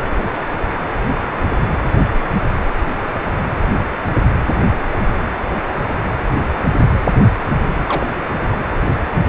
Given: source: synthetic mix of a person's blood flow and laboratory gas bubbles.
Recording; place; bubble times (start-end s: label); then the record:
Doppler ultrasound of blood flow; precordium
7.88-8.06 s: bubbles
From the record:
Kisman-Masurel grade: 122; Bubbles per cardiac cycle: 1 to 2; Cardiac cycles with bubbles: 10 to 50%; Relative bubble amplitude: moderate (0.250 to 0.450); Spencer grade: 2 (many but less than half of the cardiac periods contain bubble signals, singularly or in groups); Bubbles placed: anywhere in the cardiac cycle